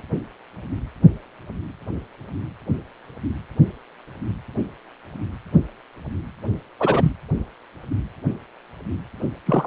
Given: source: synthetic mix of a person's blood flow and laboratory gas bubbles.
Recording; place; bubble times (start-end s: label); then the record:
Doppler ultrasound of blood flow; precordium
6.79-7.12 s: bubbles
9.46-9.67 s: bubbles
From the record:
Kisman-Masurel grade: 123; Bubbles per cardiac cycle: 1 to 2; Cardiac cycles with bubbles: 10 to 50%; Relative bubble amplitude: loud (0.450 to 0.775); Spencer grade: 2 (many but less than half of the cardiac periods contain bubble signals, singularly or in groups); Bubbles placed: anywhere in the cardiac cycle